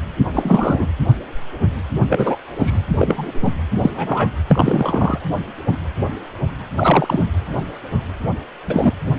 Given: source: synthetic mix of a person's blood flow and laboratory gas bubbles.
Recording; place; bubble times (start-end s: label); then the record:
Doppler ultrasound of blood flow; precordium
0.33-0.88 s: bubbles
2.08-2.36 s: bubbles
2.57-2.79 s: bubbles
2.92-3.33 s: bubbles
3.42-3.51 s: bubbles
3.81-3.91 s: bubbles
3.95-4.28 s: bubbles
4.50-5.18 s: bubbles
6.76-7.23 s: bubbles
8.66-8.93 s: bubbles
9.05-9.14 s: bubbles
From the record:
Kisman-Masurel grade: 233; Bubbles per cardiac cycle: several, 3 to 8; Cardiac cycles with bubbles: 50 to 99%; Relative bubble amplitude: loud (0.450 to 0.775); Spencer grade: 3 (all of the cardiac periods contain showers or single bubble signals, but not dominating or overriding the cardiac motion signals); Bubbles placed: anywhere in the cardiac cycle